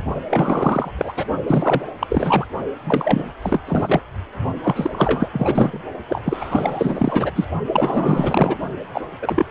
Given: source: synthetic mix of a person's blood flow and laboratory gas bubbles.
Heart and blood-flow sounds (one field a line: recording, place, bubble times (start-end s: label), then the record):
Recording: Doppler ultrasound of blood flow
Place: precordium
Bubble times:
0.27-0.91 s: bubbles
0.97-1.13 s: bubbles
1.17-1.25 s: bubbles
1.47-1.82 s: bubbles
1.99-2.46 s: bubbles
2.83-3.33 s: bubbles
3.42-3.60 s: bubbles
3.67-4.00 s: bubbles
4.63-5.29 s: bubbles
5.32-5.79 s: bubbles
6.08-7.30 s: bubbles
7.35-7.44 s: bubbles
7.67-8.57 s: bubbles
8.92-9.02 s: bubbles
9.21-9.45 s: bubbles
From the record:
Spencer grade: 4 (maximum detectable bubble signal sounding continuously throughout systole and diastole of every cardiac period, and overriding the amplitude of the normal cardiac signals)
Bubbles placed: only in the low amplitude regions of the cardiac cycle